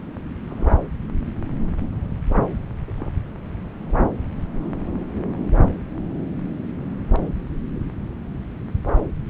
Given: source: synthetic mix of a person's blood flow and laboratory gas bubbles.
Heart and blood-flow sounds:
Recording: Doppler ultrasound of blood flow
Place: subclavian vein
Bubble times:
0.46-0.77 s: bubbles
2.87-3.23 s: bubbles
From the record:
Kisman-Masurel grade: 121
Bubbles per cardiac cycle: 1 to 2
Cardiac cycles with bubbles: 10 to 50%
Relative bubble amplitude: barely perceptible (0.100 to 0.250)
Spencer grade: 2 (many but less than half of the cardiac periods contain bubble signals, singularly or in groups)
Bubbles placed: anywhere in the cardiac cycle

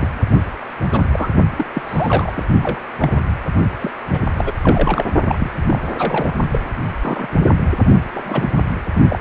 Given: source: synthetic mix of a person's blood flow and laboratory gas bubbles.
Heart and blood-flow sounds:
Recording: Doppler ultrasound of blood flow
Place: precordium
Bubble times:
0.00-0.08 s: bubbles
0.30-0.40 s: bubbles
0.92-1.09 s: bubbles
1.12-1.28 s: bubbles
1.56-1.65 s: bubbles
1.74-2.31 s: bubbles
2.34-2.43 s: bubbles
2.62-2.81 s: bubbles
3.00-3.20 s: bubbles
3.80-3.91 s: bubbles
4.09-4.18 s: bubbles
4.38-4.54 s: bubbles
4.62-5.05 s: bubbles
5.28-5.50 s: bubbles
5.67-5.79 s: bubbles
5.82-5.88 s: bubbles
5.92-6.32 s: bubbles
6.51-6.59 s: bubbles
7.02-7.34 s: bubbles
7.46-7.51 s: bubbles
8.14-8.50 s: bubbles
9.08-9.19 s: bubbles
From the record:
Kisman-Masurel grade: 242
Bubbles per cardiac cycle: several, 3 to 8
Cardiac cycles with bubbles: 100%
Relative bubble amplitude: moderate (0.250 to 0.450)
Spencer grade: 3 (all of the cardiac periods contain showers or single bubble signals, but not dominating or overriding the cardiac motion signals)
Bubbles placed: only in the low amplitude regions of the cardiac cycle

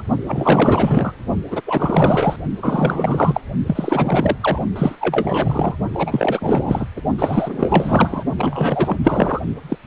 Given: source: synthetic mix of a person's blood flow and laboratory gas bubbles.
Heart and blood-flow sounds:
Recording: Doppler ultrasound of blood flow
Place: precordium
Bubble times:
0.00-0.02 s: bubbles
0.27-1.14 s: bubbles
1.50-1.61 s: bubbles
1.66-2.36 s: bubbles
2.62-3.40 s: bubbles
3.67-4.36 s: bubbles
4.41-4.60 s: bubbles
4.76-5.76 s: bubbles
5.93-6.87 s: bubbles
6.96-7.01 s: bubbles
7.18-8.23 s: bubbles
8.38-8.97 s: bubbles
9.04-9.41 s: bubbles
9.68-9.76 s: bubbles
From the record:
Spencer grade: 4 (maximum detectable bubble signal sounding continuously throughout systole and diastole of every cardiac period, and overriding the amplitude of the normal cardiac signals)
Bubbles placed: only in the low amplitude regions of the cardiac cycle

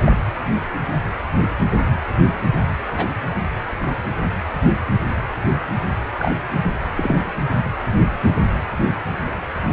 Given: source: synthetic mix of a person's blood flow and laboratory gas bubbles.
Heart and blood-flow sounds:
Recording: Doppler ultrasound of blood flow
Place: precordium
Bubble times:
0.06-0.16 s: bubbles
2.93-3.05 s: bubbles
6.20-6.36 s: bubbles
6.97-7.19 s: bubbles
From the record:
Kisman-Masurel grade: 122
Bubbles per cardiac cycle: 1 to 2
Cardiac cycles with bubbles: 10 to 50%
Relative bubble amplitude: moderate (0.250 to 0.450)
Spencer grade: 2 (many but less than half of the cardiac periods contain bubble signals, singularly or in groups)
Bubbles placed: anywhere in the cardiac cycle

